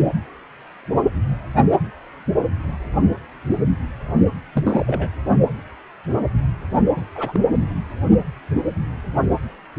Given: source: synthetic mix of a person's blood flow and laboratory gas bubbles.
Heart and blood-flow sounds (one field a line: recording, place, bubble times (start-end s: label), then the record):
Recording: Doppler ultrasound of blood flow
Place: precordium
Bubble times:
4.53-5.09 s: bubbles
6.96-7.04 s: bubbles
7.15-7.40 s: bubbles
From the record:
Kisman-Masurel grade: 222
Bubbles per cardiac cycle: several, 3 to 8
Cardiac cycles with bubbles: 10 to 50%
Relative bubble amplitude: moderate (0.250 to 0.450)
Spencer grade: 2 (many but less than half of the cardiac periods contain bubble signals, singularly or in groups)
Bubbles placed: only in the low amplitude regions of the cardiac cycle